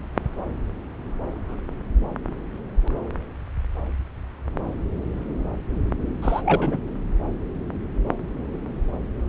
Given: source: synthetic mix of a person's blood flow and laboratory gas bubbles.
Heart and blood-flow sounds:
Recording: Doppler ultrasound of blood flow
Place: subclavian vein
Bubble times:
6.22-6.41 s: bubbles
6.45-6.77 s: bubbles
From the record:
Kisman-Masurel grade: 213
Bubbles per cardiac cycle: several, 3 to 8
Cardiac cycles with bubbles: 1 to 10%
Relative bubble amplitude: loud (0.450 to 0.775)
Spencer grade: 1 (occasional bubble signal discernible with the cardiac motion signal, with majority of cardiac periods free of bubbles)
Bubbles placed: anywhere in the cardiac cycle

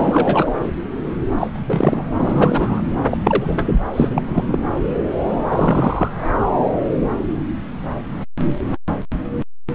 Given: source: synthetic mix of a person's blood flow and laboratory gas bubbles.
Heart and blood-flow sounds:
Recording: Doppler ultrasound of blood flow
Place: subclavian vein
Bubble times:
0.00-0.51 s: bubbles
1.38-1.47 s: bubbles
1.53-2.09 s: bubbles
2.15-2.82 s: bubbles
3.10-3.18 s: bubbles
3.24-3.81 s: bubbles
3.95-4.59 s: bubbles
5.50-6.09 s: bubbles
From the record:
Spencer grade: 3 (all of the cardiac periods contain showers or single bubble signals, but not dominating or overriding the cardiac motion signals)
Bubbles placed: anywhere in the cardiac cycle

